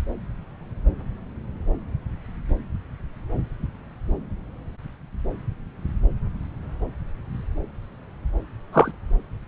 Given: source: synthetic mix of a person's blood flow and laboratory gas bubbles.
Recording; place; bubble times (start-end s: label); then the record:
Doppler ultrasound of blood flow; subclavian vein
8.73-8.92 s: bubbles
From the record:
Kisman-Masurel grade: 113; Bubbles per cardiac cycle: 1 to 2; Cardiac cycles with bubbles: 1 to 10%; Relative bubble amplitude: loud (0.450 to 0.775); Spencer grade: 1 (occasional bubble signal discernible with the cardiac motion signal, with majority of cardiac periods free of bubbles); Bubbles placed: anywhere in the cardiac cycle